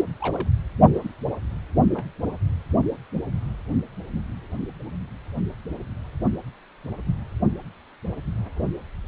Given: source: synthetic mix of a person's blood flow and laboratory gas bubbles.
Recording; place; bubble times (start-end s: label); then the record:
Doppler ultrasound of blood flow; precordium
0.20-0.48 s: bubbles
0.93-1.13 s: bubbles
1.94-2.05 s: bubbles
3.14-3.21 s: bubbles
From the record:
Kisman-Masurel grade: 121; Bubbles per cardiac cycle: 1 to 2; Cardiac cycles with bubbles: 10 to 50%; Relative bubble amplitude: barely perceptible (0.100 to 0.250); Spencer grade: 2 (many but less than half of the cardiac periods contain bubble signals, singularly or in groups); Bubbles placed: only in the low amplitude regions of the cardiac cycle